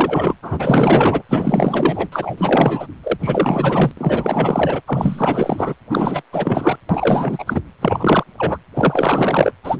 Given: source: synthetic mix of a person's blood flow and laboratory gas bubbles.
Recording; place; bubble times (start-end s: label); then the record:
Doppler ultrasound of blood flow; precordium
0.00-0.34 s: bubbles
0.42-1.22 s: bubbles
1.29-2.08 s: bubbles
2.12-2.34 s: bubbles
2.38-2.88 s: bubbles
3.03-3.17 s: bubbles
3.20-3.92 s: bubbles
3.97-4.81 s: bubbles
4.87-5.74 s: bubbles
5.89-6.22 s: bubbles
6.32-6.76 s: bubbles
6.89-7.60 s: bubbles
7.81-8.24 s: bubbles
8.38-8.58 s: bubbles
8.75-9.52 s: bubbles
9.63-9.80 s: bubbles
From the record:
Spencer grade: 4 (maximum detectable bubble signal sounding continuously throughout systole and diastole of every cardiac period, and overriding the amplitude of the normal cardiac signals); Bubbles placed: anywhere in the cardiac cycle